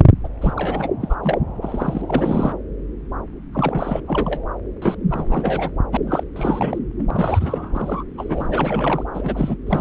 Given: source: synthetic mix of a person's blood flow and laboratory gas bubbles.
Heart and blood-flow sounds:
Doppler ultrasound of blood flow; subclavian vein
0.23-0.28 s: bubbles
0.41-0.53 s: bubbles
0.56-0.90 s: bubbles
1.00-1.15 s: bubbles
1.23-1.38 s: bubbles
1.61-2.52 s: bubbles
3.53-4.02 s: bubbles
4.07-4.40 s: bubbles
4.82-4.95 s: bubbles
5.10-5.71 s: bubbles
5.92-5.97 s: bubbles
6.07-6.24 s: bubbles
6.36-6.79 s: bubbles
6.99-7.03 s: bubbles
7.10-8.03 s: bubbles
8.17-9.04 s: bubbles
9.14-9.56 s: bubbles
9.66-9.81 s: bubbles
From the record:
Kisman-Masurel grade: 342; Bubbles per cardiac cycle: rolling drumbeat, 9 or more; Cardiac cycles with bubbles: 100%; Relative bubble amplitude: moderate (0.250 to 0.450); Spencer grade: 3 (all of the cardiac periods contain showers or single bubble signals, but not dominating or overriding the cardiac motion signals); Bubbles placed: anywhere in the cardiac cycle

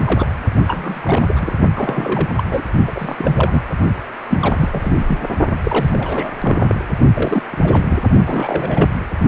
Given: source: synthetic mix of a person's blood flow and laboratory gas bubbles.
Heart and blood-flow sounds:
Doppler ultrasound of blood flow; precordium
0.00-0.27 s: bubbles
0.67-1.53 s: bubbles
1.76-2.28 s: bubbles
2.37-2.43 s: bubbles
2.47-2.62 s: bubbles
2.87-2.91 s: bubbles
2.95-3.15 s: bubbles
3.18-3.62 s: bubbles
4.29-4.38 s: bubbles
4.41-5.06 s: bubbles
5.08-5.19 s: bubbles
5.64-6.33 s: bubbles
6.39-6.75 s: bubbles
7.15-7.42 s: bubbles
7.52-7.56 s: bubbles
7.63-8.00 s: bubbles
8.25-8.88 s: bubbles
From the record:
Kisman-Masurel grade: 342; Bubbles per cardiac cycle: rolling drumbeat, 9 or more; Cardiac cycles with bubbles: 100%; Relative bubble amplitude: moderate (0.250 to 0.450); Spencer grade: 3 (all of the cardiac periods contain showers or single bubble signals, but not dominating or overriding the cardiac motion signals); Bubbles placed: only in the low amplitude regions of the cardiac cycle

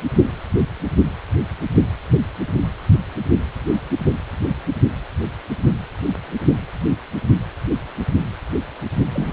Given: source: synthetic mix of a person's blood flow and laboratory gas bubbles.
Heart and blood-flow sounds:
Doppler ultrasound of blood flow; precordium
9.13-9.33 s: bubbles
From the record:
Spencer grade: 2 (many but less than half of the cardiac periods contain bubble signals, singularly or in groups); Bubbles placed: only in the low amplitude regions of the cardiac cycle

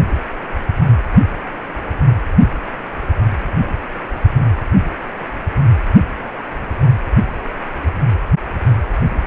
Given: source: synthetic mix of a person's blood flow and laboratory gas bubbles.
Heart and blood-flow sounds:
Doppler ultrasound of blood flow; precordium
no bubbles
From the record:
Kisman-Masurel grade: 000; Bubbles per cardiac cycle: 0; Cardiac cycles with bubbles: 0%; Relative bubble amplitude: no bubbles discernible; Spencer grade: 0 (complete lack of bubble signals)

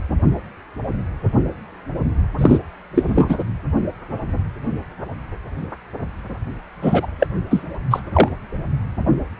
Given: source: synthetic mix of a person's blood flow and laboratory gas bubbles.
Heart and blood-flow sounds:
Doppler ultrasound of blood flow; precordium
2.38-2.59 s: bubbles
2.94-3.39 s: bubbles
6.82-7.06 s: bubbles
7.20-7.27 s: bubbles
7.50-7.63 s: bubbles
7.90-8.03 s: bubbles
8.13-8.29 s: bubbles
From the record:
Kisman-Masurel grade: 223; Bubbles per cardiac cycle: several, 3 to 8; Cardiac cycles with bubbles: 10 to 50%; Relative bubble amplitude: loud (0.450 to 0.775); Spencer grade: 2 (many but less than half of the cardiac periods contain bubble signals, singularly or in groups); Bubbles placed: anywhere in the cardiac cycle

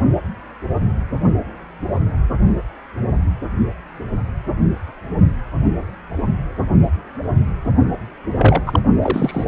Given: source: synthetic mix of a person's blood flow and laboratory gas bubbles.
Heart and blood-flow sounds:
Doppler ultrasound of blood flow; precordium
8.38-8.62 s: bubbles
8.66-8.79 s: bubbles
9.02-9.45 s: bubbles
From the record:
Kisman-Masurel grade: 213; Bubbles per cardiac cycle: several, 3 to 8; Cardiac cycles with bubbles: 1 to 10%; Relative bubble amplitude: loud (0.450 to 0.775); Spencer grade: 1 (occasional bubble signal discernible with the cardiac motion signal, with majority of cardiac periods free of bubbles); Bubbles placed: only in the low amplitude regions of the cardiac cycle

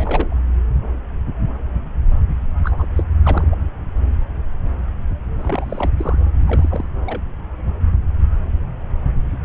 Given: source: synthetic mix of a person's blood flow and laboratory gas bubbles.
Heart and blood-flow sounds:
Doppler ultrasound of blood flow; subclavian vein
0.00-0.39 s: bubbles
2.64-2.87 s: bubbles
2.96-3.03 s: bubbles
3.23-3.47 s: bubbles
3.50-3.56 s: bubbles
5.44-5.91 s: bubbles
5.97-6.17 s: bubbles
6.46-6.88 s: bubbles
7.05-7.21 s: bubbles
From the record:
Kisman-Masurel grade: 221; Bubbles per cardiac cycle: several, 3 to 8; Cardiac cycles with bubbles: 10 to 50%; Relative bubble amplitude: barely perceptible (0.100 to 0.250); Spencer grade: 2 (many but less than half of the cardiac periods contain bubble signals, singularly or in groups); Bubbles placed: anywhere in the cardiac cycle

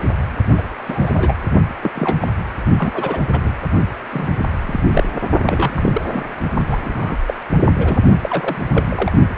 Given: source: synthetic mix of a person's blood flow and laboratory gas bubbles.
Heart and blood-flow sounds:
Doppler ultrasound of blood flow; precordium
0.57-0.63 s: bubbles
0.89-1.34 s: bubbles
1.83-1.91 s: bubbles
1.95-2.17 s: bubbles
2.21-2.28 s: bubbles
2.78-3.19 s: bubbles
3.32-3.53 s: bubbles
4.11-4.27 s: bubbles
4.62-4.82 s: bubbles
4.94-5.04 s: bubbles
5.44-6.02 s: bubbles
6.08-6.24 s: bubbles
6.67-6.80 s: bubbles
6.85-7.20 s: bubbles
7.27-7.34 s: bubbles
7.78-7.98 s: bubbles
8.22-8.56 s: bubbles
8.75-9.12 s: bubbles
From the record:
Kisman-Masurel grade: 232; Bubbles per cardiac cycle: several, 3 to 8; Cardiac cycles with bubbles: 50 to 99%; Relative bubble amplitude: moderate (0.250 to 0.450); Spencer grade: 3 (all of the cardiac periods contain showers or single bubble signals, but not dominating or overriding the cardiac motion signals); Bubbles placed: only in the low amplitude regions of the cardiac cycle

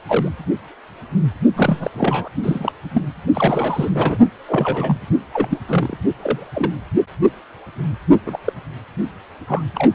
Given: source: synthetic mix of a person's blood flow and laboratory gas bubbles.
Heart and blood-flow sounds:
Doppler ultrasound of blood flow; precordium
0.07-0.28 s: bubbles
1.56-1.91 s: bubbles
1.95-2.29 s: bubbles
2.42-2.72 s: bubbles
2.94-3.04 s: bubbles
3.33-3.90 s: bubbles
3.94-4.18 s: bubbles
4.47-4.98 s: bubbles
5.34-5.58 s: bubbles
5.68-5.97 s: bubbles
6.20-6.48 s: bubbles
6.54-6.72 s: bubbles
8.26-8.38 s: bubbles
8.45-8.53 s: bubbles
9.47-9.62 s: bubbles
9.75-9.91 s: bubbles
From the record:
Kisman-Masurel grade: 232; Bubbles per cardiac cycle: several, 3 to 8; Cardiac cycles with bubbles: 50 to 99%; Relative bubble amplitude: moderate (0.250 to 0.450); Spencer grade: 3 (all of the cardiac periods contain showers or single bubble signals, but not dominating or overriding the cardiac motion signals); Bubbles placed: only in the low amplitude regions of the cardiac cycle

